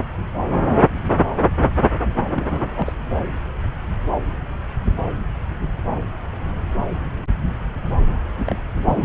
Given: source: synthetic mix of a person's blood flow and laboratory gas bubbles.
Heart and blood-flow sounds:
Doppler ultrasound of blood flow; subclavian vein
2.33-2.93 s: bubbles
8.45-8.55 s: bubbles
8.74-9.04 s: bubbles
From the record:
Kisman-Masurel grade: 221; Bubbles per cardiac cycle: several, 3 to 8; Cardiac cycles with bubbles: 10 to 50%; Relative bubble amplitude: barely perceptible (0.100 to 0.250); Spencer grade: 2 (many but less than half of the cardiac periods contain bubble signals, singularly or in groups); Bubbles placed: anywhere in the cardiac cycle

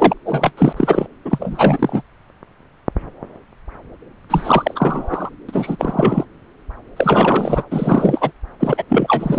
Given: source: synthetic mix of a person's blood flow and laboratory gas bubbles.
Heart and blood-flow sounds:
Doppler ultrasound of blood flow; subclavian vein
0.00-0.13 s: bubbles
0.25-0.51 s: bubbles
0.57-0.73 s: bubbles
0.77-1.07 s: bubbles
1.25-2.02 s: bubbles
4.29-5.29 s: bubbles
5.48-6.25 s: bubbles
6.96-7.63 s: bubbles
7.70-8.32 s: bubbles
8.60-8.85 s: bubbles
8.88-9.39 s: bubbles
From the record:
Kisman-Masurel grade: 333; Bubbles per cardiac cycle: rolling drumbeat, 9 or more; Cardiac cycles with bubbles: 50 to 99%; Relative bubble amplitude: loud (0.450 to 0.775); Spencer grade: 3 (all of the cardiac periods contain showers or single bubble signals, but not dominating or overriding the cardiac motion signals); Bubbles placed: anywhere in the cardiac cycle

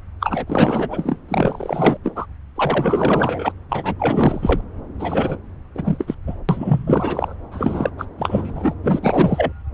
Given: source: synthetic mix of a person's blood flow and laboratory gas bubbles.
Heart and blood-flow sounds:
Doppler ultrasound of blood flow; subclavian vein
0.20-1.19 s: bubbles
1.28-1.97 s: bubbles
2.04-2.26 s: bubbles
2.56-3.52 s: bubbles
3.69-3.94 s: bubbles
3.99-4.61 s: bubbles
4.99-5.39 s: bubbles
5.75-6.16 s: bubbles
6.27-6.36 s: bubbles
6.49-7.36 s: bubbles
7.51-7.90 s: bubbles
7.98-8.05 s: bubbles
8.18-8.74 s: bubbles
8.83-9.53 s: bubbles
From the record:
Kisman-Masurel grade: 444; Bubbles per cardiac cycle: continuous sound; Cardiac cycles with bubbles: 100%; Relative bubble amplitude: maximal (0.775 to 0.999); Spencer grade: 4 (maximum detectable bubble signal sounding continuously throughout systole and diastole of every cardiac period, and overriding the amplitude of the normal cardiac signals); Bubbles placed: anywhere in the cardiac cycle

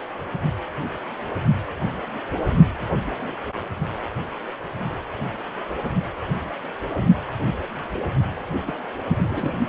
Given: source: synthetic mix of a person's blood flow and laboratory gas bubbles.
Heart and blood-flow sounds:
Doppler ultrasound of blood flow; precordium
8.67-8.72 s: bubbles
9.07-9.60 s: bubbles
From the record:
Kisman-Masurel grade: 211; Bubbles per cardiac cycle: several, 3 to 8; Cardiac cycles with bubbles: 1 to 10%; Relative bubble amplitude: barely perceptible (0.100 to 0.250); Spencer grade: 1 (occasional bubble signal discernible with the cardiac motion signal, with majority of cardiac periods free of bubbles); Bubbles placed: anywhere in the cardiac cycle

